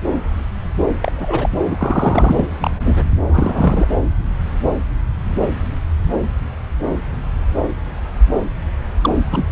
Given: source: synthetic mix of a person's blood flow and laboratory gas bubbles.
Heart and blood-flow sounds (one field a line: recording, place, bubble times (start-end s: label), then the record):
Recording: Doppler ultrasound of blood flow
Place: subclavian vein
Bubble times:
1.00-1.12 s: bubbles
1.16-1.49 s: bubbles
1.70-2.45 s: bubbles
2.60-3.06 s: bubbles
3.27-3.88 s: bubbles
9.02-9.10 s: bubbles
9.31-9.52 s: bubbles
From the record:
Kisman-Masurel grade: 232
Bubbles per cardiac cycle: several, 3 to 8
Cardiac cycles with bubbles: 50 to 99%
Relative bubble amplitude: moderate (0.250 to 0.450)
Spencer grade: 3 (all of the cardiac periods contain showers or single bubble signals, but not dominating or overriding the cardiac motion signals)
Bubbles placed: anywhere in the cardiac cycle